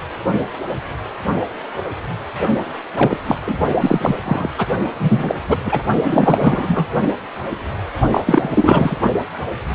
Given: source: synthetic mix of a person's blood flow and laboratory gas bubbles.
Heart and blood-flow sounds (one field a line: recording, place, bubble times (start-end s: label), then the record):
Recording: Doppler ultrasound of blood flow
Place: precordium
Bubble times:
2.96-3.18 s: bubbles
3.27-3.38 s: bubbles
3.47-3.54 s: bubbles
3.81-4.16 s: bubbles
4.25-4.49 s: bubbles
4.58-4.67 s: bubbles
5.00-5.43 s: bubbles
5.48-5.58 s: bubbles
5.63-5.82 s: bubbles
6.04-6.88 s: bubbles
8.11-8.98 s: bubbles
From the record:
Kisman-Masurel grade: 333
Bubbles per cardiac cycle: rolling drumbeat, 9 or more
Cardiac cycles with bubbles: 50 to 99%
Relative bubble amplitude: loud (0.450 to 0.775)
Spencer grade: 3 (all of the cardiac periods contain showers or single bubble signals, but not dominating or overriding the cardiac motion signals)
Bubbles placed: only in the low amplitude regions of the cardiac cycle